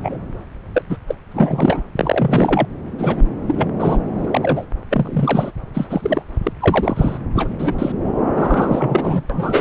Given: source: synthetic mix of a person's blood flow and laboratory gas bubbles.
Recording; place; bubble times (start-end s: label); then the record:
Doppler ultrasound of blood flow; subclavian vein
0.00-0.18 s: bubbles
0.74-0.83 s: bubbles
0.89-0.98 s: bubbles
1.06-1.15 s: bubbles
1.31-1.83 s: bubbles
1.96-2.66 s: bubbles
2.98-3.24 s: bubbles
3.48-3.68 s: bubbles
3.79-3.98 s: bubbles
4.17-4.66 s: bubbles
4.90-5.51 s: bubbles
5.74-6.23 s: bubbles
6.43-6.53 s: bubbles
6.60-7.17 s: bubbles
7.34-7.49 s: bubbles
7.58-7.73 s: bubbles
7.78-7.92 s: bubbles
8.35-9.21 s: bubbles
9.29-9.61 s: bubbles
From the record:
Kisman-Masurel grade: 243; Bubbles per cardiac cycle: several, 3 to 8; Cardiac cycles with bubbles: 100%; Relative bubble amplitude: loud (0.450 to 0.775); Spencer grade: 3 (all of the cardiac periods contain showers or single bubble signals, but not dominating or overriding the cardiac motion signals); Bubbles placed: anywhere in the cardiac cycle